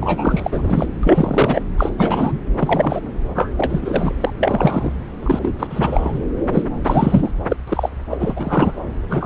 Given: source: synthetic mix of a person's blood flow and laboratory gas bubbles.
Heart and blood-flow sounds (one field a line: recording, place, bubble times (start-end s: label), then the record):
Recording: Doppler ultrasound of blood flow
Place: subclavian vein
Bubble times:
0.01-0.86 s: bubbles
1.03-1.62 s: bubbles
1.77-1.90 s: bubbles
1.98-2.40 s: bubbles
2.59-3.00 s: bubbles
3.35-3.52 s: bubbles
3.57-4.15 s: bubbles
4.20-4.33 s: bubbles
4.41-4.92 s: bubbles
5.22-5.39 s: bubbles
5.42-5.55 s: bubbles
5.59-5.67 s: bubbles
5.70-6.20 s: bubbles
6.53-6.64 s: bubbles
6.84-7.32 s: bubbles
7.48-7.56 s: bubbles
7.68-7.89 s: bubbles
8.10-8.72 s: bubbles
9.09-9.26 s: bubbles
From the record:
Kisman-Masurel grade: 343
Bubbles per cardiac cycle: rolling drumbeat, 9 or more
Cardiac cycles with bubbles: 100%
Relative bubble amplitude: loud (0.450 to 0.775)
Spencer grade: 3 (all of the cardiac periods contain showers or single bubble signals, but not dominating or overriding the cardiac motion signals)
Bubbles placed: anywhere in the cardiac cycle